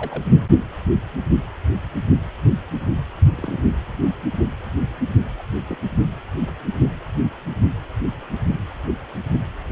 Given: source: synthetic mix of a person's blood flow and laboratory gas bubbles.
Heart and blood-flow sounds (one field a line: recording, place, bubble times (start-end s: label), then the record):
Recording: Doppler ultrasound of blood flow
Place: precordium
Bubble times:
0.00-0.23 s: bubbles
3.31-3.61 s: bubbles
5.38-5.42 s: bubbles
5.68-5.77 s: bubbles
From the record:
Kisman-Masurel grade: 121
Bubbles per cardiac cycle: 1 to 2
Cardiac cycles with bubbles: 10 to 50%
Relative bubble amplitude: barely perceptible (0.100 to 0.250)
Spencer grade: 2 (many but less than half of the cardiac periods contain bubble signals, singularly or in groups)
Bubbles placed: only in the low amplitude regions of the cardiac cycle